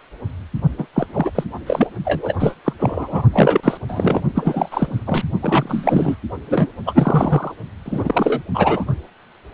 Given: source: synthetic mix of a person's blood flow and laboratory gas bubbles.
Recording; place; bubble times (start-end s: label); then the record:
Doppler ultrasound of blood flow; precordium
0.78-0.86 s: bubbles
0.93-1.06 s: bubbles
1.12-1.30 s: bubbles
1.35-1.44 s: bubbles
1.66-1.87 s: bubbles
2.04-2.33 s: bubbles
2.39-2.54 s: bubbles
2.64-2.73 s: bubbles
2.78-3.23 s: bubbles
3.33-3.77 s: bubbles
3.88-4.21 s: bubbles
4.35-5.03 s: bubbles
5.07-5.23 s: bubbles
5.42-6.16 s: bubbles
6.50-6.69 s: bubbles
6.86-7.52 s: bubbles
7.85-8.42 s: bubbles
8.54-8.85 s: bubbles
From the record:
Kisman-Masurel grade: 333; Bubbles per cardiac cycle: rolling drumbeat, 9 or more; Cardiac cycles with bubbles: 50 to 99%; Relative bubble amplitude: loud (0.450 to 0.775); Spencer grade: 3 (all of the cardiac periods contain showers or single bubble signals, but not dominating or overriding the cardiac motion signals); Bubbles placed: only in the low amplitude regions of the cardiac cycle